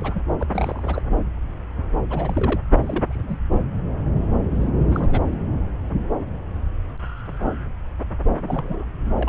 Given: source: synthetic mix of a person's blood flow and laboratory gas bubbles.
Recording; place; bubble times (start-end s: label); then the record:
Doppler ultrasound of blood flow; subclavian vein
0.00-0.21 s: bubbles
0.40-0.46 s: bubbles
0.50-1.02 s: bubbles
2.10-2.60 s: bubbles
2.83-3.39 s: bubbles
3.52-3.59 s: bubbles
4.56-4.71 s: bubbles
4.79-5.22 s: bubbles
5.30-5.35 s: bubbles
8.42-8.89 s: bubbles
9.16-9.29 s: bubbles
From the record:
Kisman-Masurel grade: 221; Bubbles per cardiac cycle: several, 3 to 8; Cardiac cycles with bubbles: 10 to 50%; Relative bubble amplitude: barely perceptible (0.100 to 0.250); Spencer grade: 2 (many but less than half of the cardiac periods contain bubble signals, singularly or in groups); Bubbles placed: anywhere in the cardiac cycle